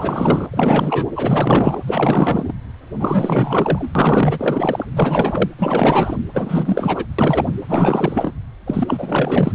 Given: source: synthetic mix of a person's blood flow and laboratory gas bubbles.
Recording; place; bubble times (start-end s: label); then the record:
Doppler ultrasound of blood flow; precordium
0.00-0.47 s: bubbles
0.51-1.07 s: bubbles
1.16-1.80 s: bubbles
1.86-2.54 s: bubbles
2.99-3.92 s: bubbles
3.95-4.86 s: bubbles
4.95-5.47 s: bubbles
5.58-6.17 s: bubbles
6.33-7.05 s: bubbles
7.18-7.46 s: bubbles
7.68-8.34 s: bubbles
8.66-9.55 s: bubbles
From the record:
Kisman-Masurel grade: 444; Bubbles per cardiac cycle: continuous sound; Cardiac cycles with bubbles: 100%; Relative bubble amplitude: maximal (0.775 to 0.999); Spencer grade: 4 (maximum detectable bubble signal sounding continuously throughout systole and diastole of every cardiac period, and overriding the amplitude of the normal cardiac signals); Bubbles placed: anywhere in the cardiac cycle